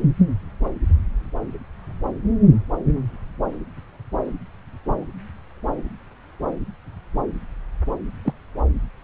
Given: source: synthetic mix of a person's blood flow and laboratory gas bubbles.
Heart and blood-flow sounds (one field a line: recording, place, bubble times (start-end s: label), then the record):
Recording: Doppler ultrasound of blood flow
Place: subclavian vein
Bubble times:
8.25-8.33 s: bubbles
From the record:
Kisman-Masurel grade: 112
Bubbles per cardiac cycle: 1 to 2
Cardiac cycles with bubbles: 1 to 10%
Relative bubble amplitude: moderate (0.250 to 0.450)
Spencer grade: 1 (occasional bubble signal discernible with the cardiac motion signal, with majority of cardiac periods free of bubbles)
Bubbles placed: anywhere in the cardiac cycle